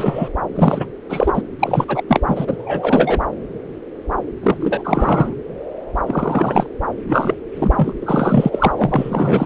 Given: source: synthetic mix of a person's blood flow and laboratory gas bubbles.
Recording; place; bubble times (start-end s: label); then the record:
Doppler ultrasound of blood flow; subclavian vein
0.00-0.29 s: bubbles
0.55-0.86 s: bubbles
1.09-1.42 s: bubbles
1.60-1.85 s: bubbles
1.88-2.03 s: bubbles
2.08-2.20 s: bubbles
2.27-3.21 s: bubbles
4.43-4.57 s: bubbles
4.60-5.36 s: bubbles
6.06-6.67 s: bubbles
7.06-7.34 s: bubbles
7.56-7.93 s: bubbles
8.01-8.71 s: bubbles
8.75-9.46 s: bubbles
From the record:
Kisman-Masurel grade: 333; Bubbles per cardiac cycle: rolling drumbeat, 9 or more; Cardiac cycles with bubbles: 50 to 99%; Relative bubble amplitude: loud (0.450 to 0.775); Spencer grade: 3 (all of the cardiac periods contain showers or single bubble signals, but not dominating or overriding the cardiac motion signals); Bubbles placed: anywhere in the cardiac cycle